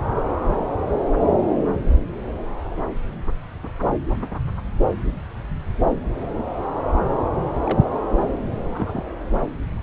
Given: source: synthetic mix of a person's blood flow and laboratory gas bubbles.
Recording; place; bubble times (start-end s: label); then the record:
Doppler ultrasound of blood flow; subclavian vein
7.65-7.90 s: bubbles
8.62-9.02 s: bubbles
From the record:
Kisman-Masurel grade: 121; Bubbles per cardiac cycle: 1 to 2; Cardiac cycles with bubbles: 10 to 50%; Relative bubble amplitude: barely perceptible (0.100 to 0.250); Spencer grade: 2 (many but less than half of the cardiac periods contain bubble signals, singularly or in groups); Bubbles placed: anywhere in the cardiac cycle